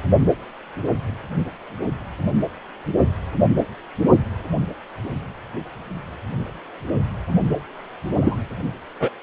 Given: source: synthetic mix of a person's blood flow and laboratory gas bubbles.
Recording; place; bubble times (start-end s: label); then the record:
Doppler ultrasound of blood flow; precordium
8.21-8.36 s: bubbles
9.00-9.11 s: bubbles
From the record:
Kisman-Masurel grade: 113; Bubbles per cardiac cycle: 1 to 2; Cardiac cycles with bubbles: 1 to 10%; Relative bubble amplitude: loud (0.450 to 0.775); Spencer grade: 1 (occasional bubble signal discernible with the cardiac motion signal, with majority of cardiac periods free of bubbles); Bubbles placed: only in the low amplitude regions of the cardiac cycle